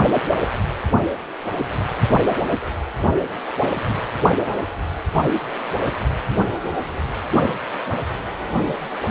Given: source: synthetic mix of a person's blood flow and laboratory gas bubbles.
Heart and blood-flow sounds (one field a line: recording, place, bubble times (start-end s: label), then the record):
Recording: Doppler ultrasound of blood flow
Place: precordium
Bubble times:
3.62-3.81 s: bubbles
3.86-3.97 s: bubbles
4.21-4.30 s: bubbles
4.48-4.57 s: bubbles
From the record:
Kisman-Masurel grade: 211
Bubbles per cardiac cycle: several, 3 to 8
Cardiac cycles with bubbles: 1 to 10%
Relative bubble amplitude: barely perceptible (0.100 to 0.250)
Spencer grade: 1 (occasional bubble signal discernible with the cardiac motion signal, with majority of cardiac periods free of bubbles)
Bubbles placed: anywhere in the cardiac cycle